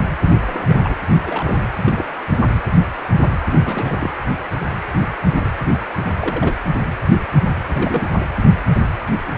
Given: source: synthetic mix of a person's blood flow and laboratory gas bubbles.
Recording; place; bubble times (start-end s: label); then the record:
Doppler ultrasound of blood flow; precordium
0.22-0.95 s: bubbles
1.24-1.54 s: bubbles
1.84-2.05 s: bubbles
2.51-2.59 s: bubbles
3.52-4.11 s: bubbles
5.24-5.50 s: bubbles
6.18-6.55 s: bubbles
7.73-8.07 s: bubbles
From the record:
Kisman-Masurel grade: 221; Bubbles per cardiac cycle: several, 3 to 8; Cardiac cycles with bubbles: 10 to 50%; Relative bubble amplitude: barely perceptible (0.100 to 0.250); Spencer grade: 2 (many but less than half of the cardiac periods contain bubble signals, singularly or in groups); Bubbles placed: anywhere in the cardiac cycle